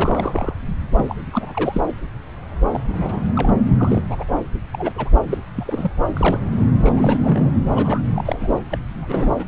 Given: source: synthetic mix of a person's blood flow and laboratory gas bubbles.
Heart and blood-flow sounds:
Doppler ultrasound of blood flow; subclavian vein
0.00-0.53 s: bubbles
0.97-1.16 s: bubbles
1.33-1.82 s: bubbles
2.72-2.81 s: bubbles
2.89-3.23 s: bubbles
3.35-3.52 s: bubbles
3.74-4.01 s: bubbles
4.09-4.24 s: bubbles
4.72-5.09 s: bubbles
5.30-5.38 s: bubbles
5.55-5.91 s: bubbles
6.13-6.40 s: bubbles
6.51-6.69 s: bubbles
6.79-7.50 s: bubbles
7.75-8.01 s: bubbles
8.14-8.59 s: bubbles
8.70-8.78 s: bubbles
8.95-9.31 s: bubbles
9.37-9.48 s: bubbles
From the record:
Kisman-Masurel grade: 232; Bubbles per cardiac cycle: several, 3 to 8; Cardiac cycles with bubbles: 50 to 99%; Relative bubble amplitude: moderate (0.250 to 0.450); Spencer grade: 3 (all of the cardiac periods contain showers or single bubble signals, but not dominating or overriding the cardiac motion signals); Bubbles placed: anywhere in the cardiac cycle

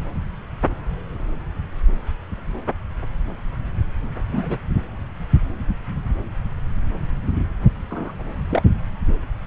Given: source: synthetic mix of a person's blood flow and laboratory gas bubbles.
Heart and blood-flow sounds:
Doppler ultrasound of blood flow; subclavian vein
4.31-4.58 s: bubbles
7.90-8.13 s: bubbles
8.50-8.62 s: bubbles
From the record:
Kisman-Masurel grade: 122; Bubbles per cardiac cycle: 1 to 2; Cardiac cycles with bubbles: 10 to 50%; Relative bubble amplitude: moderate (0.250 to 0.450); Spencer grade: 2 (many but less than half of the cardiac periods contain bubble signals, singularly or in groups); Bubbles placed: anywhere in the cardiac cycle

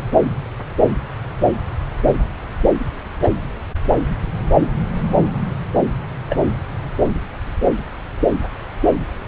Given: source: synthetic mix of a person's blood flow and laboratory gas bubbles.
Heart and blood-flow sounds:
Doppler ultrasound of blood flow; subclavian vein
3.22-3.30 s: bubbles
6.29-6.44 s: bubbles
From the record:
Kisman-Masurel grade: 122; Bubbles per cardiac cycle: 1 to 2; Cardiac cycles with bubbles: 10 to 50%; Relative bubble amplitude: moderate (0.250 to 0.450); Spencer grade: 2 (many but less than half of the cardiac periods contain bubble signals, singularly or in groups); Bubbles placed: anywhere in the cardiac cycle

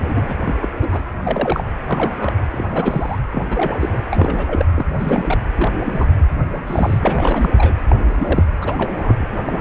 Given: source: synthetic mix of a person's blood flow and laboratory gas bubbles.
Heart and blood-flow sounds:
Doppler ultrasound of blood flow; precordium
0.03-0.38 s: bubbles
0.46-0.54 s: bubbles
0.60-0.68 s: bubbles
0.80-1.02 s: bubbles
1.23-1.64 s: bubbles
1.88-2.35 s: bubbles
2.52-2.67 s: bubbles
2.70-3.19 s: bubbles
3.31-3.47 s: bubbles
3.50-4.02 s: bubbles
4.10-4.66 s: bubbles
4.75-4.86 s: bubbles
4.98-5.38 s: bubbles
5.58-5.71 s: bubbles
5.86-6.08 s: bubbles
6.51-6.99 s: bubbles
7.01-7.50 s: bubbles
7.57-7.73 s: bubbles
7.88-7.96 s: bubbles
8.17-8.44 s: bubbles
8.60-9.26 s: bubbles
9.45-9.61 s: bubbles
From the record:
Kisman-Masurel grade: 242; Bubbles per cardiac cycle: several, 3 to 8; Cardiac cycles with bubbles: 100%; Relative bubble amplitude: moderate (0.250 to 0.450); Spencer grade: 3 (all of the cardiac periods contain showers or single bubble signals, but not dominating or overriding the cardiac motion signals); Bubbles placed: anywhere in the cardiac cycle

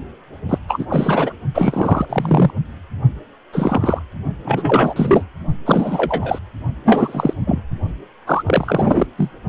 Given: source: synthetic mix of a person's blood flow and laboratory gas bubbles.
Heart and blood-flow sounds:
Doppler ultrasound of blood flow; precordium
0.49-0.58 s: bubbles
0.68-0.85 s: bubbles
0.89-1.34 s: bubbles
1.54-2.05 s: bubbles
2.09-2.50 s: bubbles
3.52-4.03 s: bubbles
4.44-5.25 s: bubbles
5.65-6.39 s: bubbles
6.85-7.33 s: bubbles
7.46-7.62 s: bubbles
8.27-8.43 s: bubbles
8.46-9.06 s: bubbles
9.17-9.31 s: bubbles
From the record:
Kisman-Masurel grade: 243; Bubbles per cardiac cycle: several, 3 to 8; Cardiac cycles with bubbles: 100%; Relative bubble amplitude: loud (0.450 to 0.775); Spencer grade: 3 (all of the cardiac periods contain showers or single bubble signals, but not dominating or overriding the cardiac motion signals); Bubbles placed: only in the low amplitude regions of the cardiac cycle

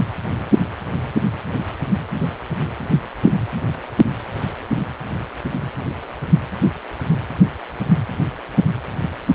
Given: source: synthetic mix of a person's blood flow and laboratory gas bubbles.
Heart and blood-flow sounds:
Doppler ultrasound of blood flow; precordium
3.23-3.35 s: bubbles
From the record:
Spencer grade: 1 (occasional bubble signal discernible with the cardiac motion signal, with majority of cardiac periods free of bubbles); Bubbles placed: anywhere in the cardiac cycle

